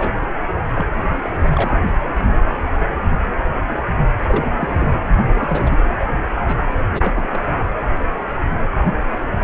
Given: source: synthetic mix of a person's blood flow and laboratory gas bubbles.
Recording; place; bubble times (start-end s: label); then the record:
Doppler ultrasound of blood flow; precordium
0.00-0.12 s: bubbles
0.22-0.26 s: bubbles
0.73-0.85 s: bubbles
1.22-1.31 s: bubbles
1.52-1.78 s: bubbles
4.27-4.50 s: bubbles
4.56-4.92 s: bubbles
5.15-5.22 s: bubbles
5.31-5.76 s: bubbles
6.47-6.54 s: bubbles
6.91-7.45 s: bubbles
From the record:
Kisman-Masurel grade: 232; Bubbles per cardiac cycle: several, 3 to 8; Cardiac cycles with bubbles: 50 to 99%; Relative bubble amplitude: moderate (0.250 to 0.450); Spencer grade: 3 (all of the cardiac periods contain showers or single bubble signals, but not dominating or overriding the cardiac motion signals); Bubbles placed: anywhere in the cardiac cycle